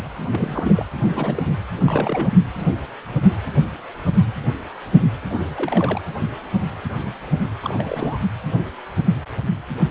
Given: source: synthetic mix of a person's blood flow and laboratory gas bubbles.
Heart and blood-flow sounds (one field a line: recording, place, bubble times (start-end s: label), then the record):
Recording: Doppler ultrasound of blood flow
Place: precordium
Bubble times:
0.32-0.89 s: bubbles
0.98-1.43 s: bubbles
1.46-1.52 s: bubbles
1.85-2.31 s: bubbles
5.29-5.42 s: bubbles
5.56-6.01 s: bubbles
7.62-8.19 s: bubbles
From the record:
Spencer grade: 2 (many but less than half of the cardiac periods contain bubble signals, singularly or in groups)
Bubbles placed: anywhere in the cardiac cycle